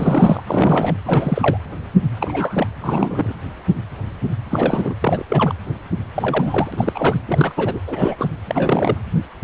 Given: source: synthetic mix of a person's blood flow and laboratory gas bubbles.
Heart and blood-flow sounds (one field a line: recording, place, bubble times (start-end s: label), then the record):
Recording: Doppler ultrasound of blood flow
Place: precordium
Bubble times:
0.00-0.42 s: bubbles
0.47-0.95 s: bubbles
1.05-1.57 s: bubbles
2.21-2.67 s: bubbles
2.79-3.33 s: bubbles
4.50-4.95 s: bubbles
5.01-5.24 s: bubbles
5.29-5.53 s: bubbles
6.14-7.20 s: bubbles
7.28-7.81 s: bubbles
7.87-8.16 s: bubbles
8.19-8.28 s: bubbles
8.47-8.97 s: bubbles
From the record:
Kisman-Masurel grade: 332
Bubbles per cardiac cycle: rolling drumbeat, 9 or more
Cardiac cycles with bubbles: 50 to 99%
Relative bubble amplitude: moderate (0.250 to 0.450)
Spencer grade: 3 (all of the cardiac periods contain showers or single bubble signals, but not dominating or overriding the cardiac motion signals)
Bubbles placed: anywhere in the cardiac cycle